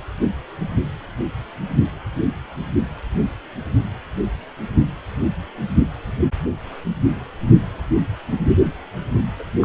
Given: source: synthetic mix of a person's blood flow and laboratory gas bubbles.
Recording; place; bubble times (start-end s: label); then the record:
Doppler ultrasound of blood flow; precordium
9.39-9.44 s: bubbles
9.62-9.65 s: bubbles
From the record:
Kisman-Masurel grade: 211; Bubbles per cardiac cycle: several, 3 to 8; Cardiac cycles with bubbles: 1 to 10%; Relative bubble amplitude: barely perceptible (0.100 to 0.250); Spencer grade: 1 (occasional bubble signal discernible with the cardiac motion signal, with majority of cardiac periods free of bubbles); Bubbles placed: anywhere in the cardiac cycle